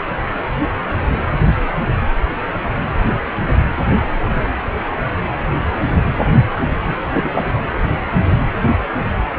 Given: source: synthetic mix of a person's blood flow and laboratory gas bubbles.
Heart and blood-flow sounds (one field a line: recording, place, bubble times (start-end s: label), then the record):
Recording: Doppler ultrasound of blood flow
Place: precordium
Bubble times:
7.14-7.32 s: bubbles
7.35-7.43 s: bubbles
From the record:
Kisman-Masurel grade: 212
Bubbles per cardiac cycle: several, 3 to 8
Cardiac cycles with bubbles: 1 to 10%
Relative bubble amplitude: moderate (0.250 to 0.450)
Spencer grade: 1 (occasional bubble signal discernible with the cardiac motion signal, with majority of cardiac periods free of bubbles)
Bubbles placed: anywhere in the cardiac cycle